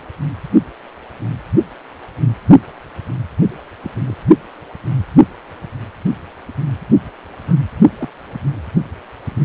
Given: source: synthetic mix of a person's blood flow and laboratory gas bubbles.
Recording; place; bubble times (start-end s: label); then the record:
Doppler ultrasound of blood flow; precordium
3.82-3.91 s: bubbles
4.06-4.17 s: bubbles
7.47-7.54 s: bubbles
7.99-8.08 s: bubbles
From the record:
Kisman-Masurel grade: 121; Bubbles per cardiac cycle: 1 to 2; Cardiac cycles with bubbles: 10 to 50%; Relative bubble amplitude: barely perceptible (0.100 to 0.250); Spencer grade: 2 (many but less than half of the cardiac periods contain bubble signals, singularly or in groups); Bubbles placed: only in the low amplitude regions of the cardiac cycle